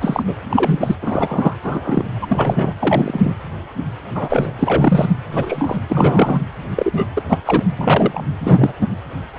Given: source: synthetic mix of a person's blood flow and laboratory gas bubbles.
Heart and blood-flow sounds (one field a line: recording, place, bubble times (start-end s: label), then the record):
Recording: Doppler ultrasound of blood flow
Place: precordium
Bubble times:
0.00-0.23 s: bubbles
0.28-0.35 s: bubbles
0.50-0.95 s: bubbles
1.02-1.54 s: bubbles
1.64-2.03 s: bubbles
2.22-2.73 s: bubbles
2.79-3.35 s: bubbles
4.14-4.52 s: bubbles
4.59-5.10 s: bubbles
5.31-5.79 s: bubbles
5.89-6.42 s: bubbles
6.76-7.06 s: bubbles
7.17-7.22 s: bubbles
7.28-7.38 s: bubbles
7.46-7.64 s: bubbles
7.77-8.22 s: bubbles
8.39-8.73 s: bubbles
8.81-8.87 s: bubbles
From the record:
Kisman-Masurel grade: 233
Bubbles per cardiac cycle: several, 3 to 8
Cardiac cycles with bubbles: 50 to 99%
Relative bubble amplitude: loud (0.450 to 0.775)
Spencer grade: 3 (all of the cardiac periods contain showers or single bubble signals, but not dominating or overriding the cardiac motion signals)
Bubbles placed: anywhere in the cardiac cycle